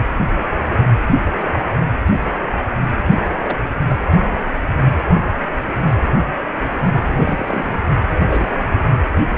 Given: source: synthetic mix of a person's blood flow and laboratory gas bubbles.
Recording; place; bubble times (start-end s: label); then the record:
Doppler ultrasound of blood flow; precordium
3.10-3.15 s: bubbles
3.27-3.33 s: bubbles
3.42-3.58 s: bubbles
3.88-3.95 s: bubbles
7.02-7.80 s: bubbles
8.08-8.55 s: bubbles
8.84-8.89 s: bubbles
From the record:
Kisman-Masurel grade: 221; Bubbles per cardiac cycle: several, 3 to 8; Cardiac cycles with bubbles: 10 to 50%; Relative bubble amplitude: barely perceptible (0.100 to 0.250); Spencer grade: 2 (many but less than half of the cardiac periods contain bubble signals, singularly or in groups); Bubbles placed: anywhere in the cardiac cycle